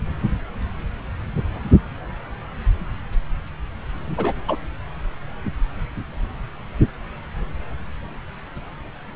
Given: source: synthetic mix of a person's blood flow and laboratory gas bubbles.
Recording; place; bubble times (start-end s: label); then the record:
Doppler ultrasound of blood flow; subclavian vein
4.09-4.33 s: bubbles
4.48-4.57 s: bubbles
From the record:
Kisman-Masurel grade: 212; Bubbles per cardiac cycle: several, 3 to 8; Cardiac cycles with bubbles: 1 to 10%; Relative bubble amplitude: moderate (0.250 to 0.450); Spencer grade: 1 (occasional bubble signal discernible with the cardiac motion signal, with majority of cardiac periods free of bubbles); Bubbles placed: anywhere in the cardiac cycle